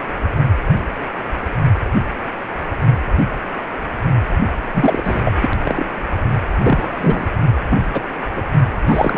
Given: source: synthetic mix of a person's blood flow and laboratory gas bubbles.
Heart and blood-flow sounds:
Doppler ultrasound of blood flow; precordium
4.74-5.21 s: bubbles
5.25-5.32 s: bubbles
5.42-5.49 s: bubbles
5.64-5.85 s: bubbles
6.63-7.27 s: bubbles
7.70-7.77 s: bubbles
7.92-8.02 s: bubbles
8.36-8.43 s: bubbles
8.87-9.18 s: bubbles
From the record:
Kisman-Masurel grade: 233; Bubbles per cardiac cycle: several, 3 to 8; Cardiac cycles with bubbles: 50 to 99%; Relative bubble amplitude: loud (0.450 to 0.775); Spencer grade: 3 (all of the cardiac periods contain showers or single bubble signals, but not dominating or overriding the cardiac motion signals); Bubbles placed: only in the low amplitude regions of the cardiac cycle

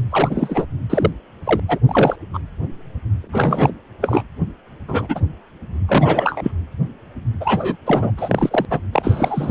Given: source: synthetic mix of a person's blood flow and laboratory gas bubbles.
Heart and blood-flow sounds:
Doppler ultrasound of blood flow; precordium
0.10-0.66 s: bubbles
0.90-1.11 s: bubbles
1.44-1.60 s: bubbles
1.68-1.79 s: bubbles
1.88-2.15 s: bubbles
2.33-2.39 s: bubbles
3.23-3.72 s: bubbles
4.01-4.23 s: bubbles
4.88-5.21 s: bubbles
5.88-6.52 s: bubbles
7.40-7.76 s: bubbles
7.86-8.11 s: bubbles
8.17-8.65 s: bubbles
8.70-8.80 s: bubbles
8.92-9.51 s: bubbles
From the record:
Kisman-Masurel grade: 233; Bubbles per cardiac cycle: several, 3 to 8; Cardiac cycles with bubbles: 50 to 99%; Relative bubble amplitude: loud (0.450 to 0.775); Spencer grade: 3 (all of the cardiac periods contain showers or single bubble signals, but not dominating or overriding the cardiac motion signals); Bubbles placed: anywhere in the cardiac cycle

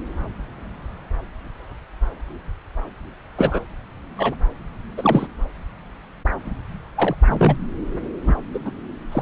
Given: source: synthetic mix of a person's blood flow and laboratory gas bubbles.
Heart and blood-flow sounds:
Doppler ultrasound of blood flow; subclavian vein
3.38-3.60 s: bubbles
4.17-4.35 s: bubbles
4.97-5.27 s: bubbles
6.95-7.15 s: bubbles
7.28-7.56 s: bubbles
8.26-8.34 s: bubbles
8.53-8.59 s: bubbles
8.65-8.72 s: bubbles
9.11-9.22 s: bubbles
From the record:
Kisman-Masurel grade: 233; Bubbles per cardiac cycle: several, 3 to 8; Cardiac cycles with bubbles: 50 to 99%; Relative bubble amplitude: loud (0.450 to 0.775); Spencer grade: 3 (all of the cardiac periods contain showers or single bubble signals, but not dominating or overriding the cardiac motion signals); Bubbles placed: anywhere in the cardiac cycle

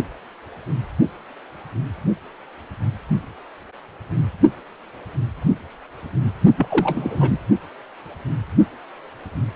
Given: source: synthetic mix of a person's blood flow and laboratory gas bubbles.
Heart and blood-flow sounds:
Doppler ultrasound of blood flow; precordium
6.57-7.38 s: bubbles
From the record:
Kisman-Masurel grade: 212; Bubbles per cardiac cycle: several, 3 to 8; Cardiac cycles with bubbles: 1 to 10%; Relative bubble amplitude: moderate (0.250 to 0.450); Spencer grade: 1 (occasional bubble signal discernible with the cardiac motion signal, with majority of cardiac periods free of bubbles); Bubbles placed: only in the low amplitude regions of the cardiac cycle

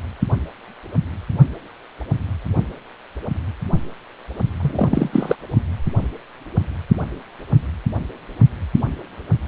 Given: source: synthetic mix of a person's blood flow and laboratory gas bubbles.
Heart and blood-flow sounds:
Doppler ultrasound of blood flow; precordium
4.60-5.09 s: bubbles
5.12-5.35 s: bubbles
From the record:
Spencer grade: 1 (occasional bubble signal discernible with the cardiac motion signal, with majority of cardiac periods free of bubbles); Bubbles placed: only in the low amplitude regions of the cardiac cycle

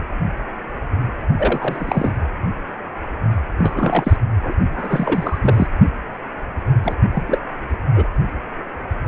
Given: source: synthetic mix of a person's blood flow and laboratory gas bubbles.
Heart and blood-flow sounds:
Doppler ultrasound of blood flow; precordium
1.37-2.12 s: bubbles
3.58-4.17 s: bubbles
4.43-4.54 s: bubbles
4.75-5.38 s: bubbles
5.42-5.67 s: bubbles
6.83-6.94 s: bubbles
7.12-7.38 s: bubbles
7.95-8.08 s: bubbles
From the record:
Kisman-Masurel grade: 232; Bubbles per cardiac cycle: several, 3 to 8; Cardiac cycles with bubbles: 50 to 99%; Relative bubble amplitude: moderate (0.250 to 0.450); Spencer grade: 3 (all of the cardiac periods contain showers or single bubble signals, but not dominating or overriding the cardiac motion signals); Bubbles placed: anywhere in the cardiac cycle

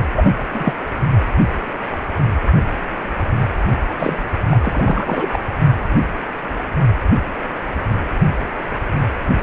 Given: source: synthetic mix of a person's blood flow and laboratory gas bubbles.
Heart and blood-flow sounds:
Doppler ultrasound of blood flow; precordium
0.15-0.31 s: bubbles
0.54-0.73 s: bubbles
3.98-4.24 s: bubbles
4.51-5.27 s: bubbles
5.33-5.42 s: bubbles
From the record:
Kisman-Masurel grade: 223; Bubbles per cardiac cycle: several, 3 to 8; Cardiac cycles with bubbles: 10 to 50%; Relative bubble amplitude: loud (0.450 to 0.775); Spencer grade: 2 (many but less than half of the cardiac periods contain bubble signals, singularly or in groups); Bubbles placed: only in the low amplitude regions of the cardiac cycle

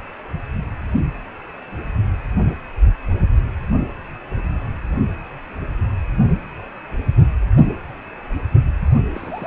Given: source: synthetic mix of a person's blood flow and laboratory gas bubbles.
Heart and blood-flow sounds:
Doppler ultrasound of blood flow; precordium
9.05-9.47 s: bubbles
From the record:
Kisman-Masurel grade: 211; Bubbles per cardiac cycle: several, 3 to 8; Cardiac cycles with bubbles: 1 to 10%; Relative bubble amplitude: barely perceptible (0.100 to 0.250); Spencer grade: 1 (occasional bubble signal discernible with the cardiac motion signal, with majority of cardiac periods free of bubbles); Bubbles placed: only in the low amplitude regions of the cardiac cycle

